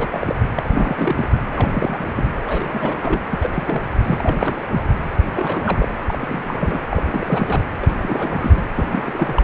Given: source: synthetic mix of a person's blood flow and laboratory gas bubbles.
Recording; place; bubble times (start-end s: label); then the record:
Doppler ultrasound of blood flow; precordium
0.00-0.08 s: bubbles
0.11-0.35 s: bubbles
0.55-1.27 s: bubbles
1.50-2.12 s: bubbles
2.15-2.29 s: bubbles
2.45-3.21 s: bubbles
3.30-3.50 s: bubbles
3.53-3.83 s: bubbles
4.02-4.64 s: bubbles
4.71-4.88 s: bubbles
5.30-5.88 s: bubbles
6.08-6.80 s: bubbles
6.90-7.60 s: bubbles
7.82-7.93 s: bubbles
8.01-8.63 s: bubbles
8.75-9.43 s: bubbles
From the record:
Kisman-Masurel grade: 342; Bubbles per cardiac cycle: rolling drumbeat, 9 or more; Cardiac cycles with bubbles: 100%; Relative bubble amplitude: moderate (0.250 to 0.450); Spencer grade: 3 (all of the cardiac periods contain showers or single bubble signals, but not dominating or overriding the cardiac motion signals); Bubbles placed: anywhere in the cardiac cycle